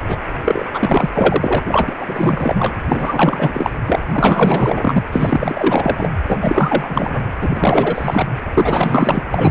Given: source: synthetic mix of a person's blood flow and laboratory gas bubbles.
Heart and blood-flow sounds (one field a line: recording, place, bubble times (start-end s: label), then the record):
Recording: Doppler ultrasound of blood flow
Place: precordium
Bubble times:
0.00-0.18 s: bubbles
0.44-0.66 s: bubbles
0.72-1.09 s: bubbles
1.15-1.95 s: bubbles
2.00-2.75 s: bubbles
2.88-3.70 s: bubbles
3.86-3.99 s: bubbles
4.09-5.03 s: bubbles
5.12-6.10 s: bubbles
6.27-7.30 s: bubbles
7.41-8.27 s: bubbles
8.54-9.23 s: bubbles
9.31-9.51 s: bubbles
From the record:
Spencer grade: 4 (maximum detectable bubble signal sounding continuously throughout systole and diastole of every cardiac period, and overriding the amplitude of the normal cardiac signals)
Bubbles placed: anywhere in the cardiac cycle